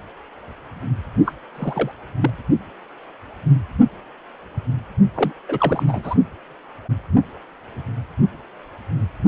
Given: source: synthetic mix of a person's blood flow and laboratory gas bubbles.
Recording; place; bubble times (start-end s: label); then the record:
Doppler ultrasound of blood flow; precordium
1.25-1.33 s: bubbles
1.55-1.92 s: bubbles
2.21-2.30 s: bubbles
5.15-5.32 s: bubbles
5.48-6.16 s: bubbles
From the record:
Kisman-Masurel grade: 222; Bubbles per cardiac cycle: several, 3 to 8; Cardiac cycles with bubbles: 10 to 50%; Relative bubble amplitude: moderate (0.250 to 0.450); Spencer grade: 2 (many but less than half of the cardiac periods contain bubble signals, singularly or in groups); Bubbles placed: only in the low amplitude regions of the cardiac cycle